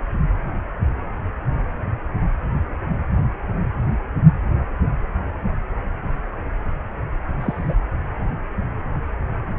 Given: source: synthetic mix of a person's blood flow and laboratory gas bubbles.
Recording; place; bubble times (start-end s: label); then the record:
Doppler ultrasound of blood flow; precordium
7.39-7.77 s: bubbles
From the record:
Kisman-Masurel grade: 112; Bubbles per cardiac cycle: 1 to 2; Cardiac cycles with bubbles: 1 to 10%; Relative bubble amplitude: moderate (0.250 to 0.450); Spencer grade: 1 (occasional bubble signal discernible with the cardiac motion signal, with majority of cardiac periods free of bubbles); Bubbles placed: anywhere in the cardiac cycle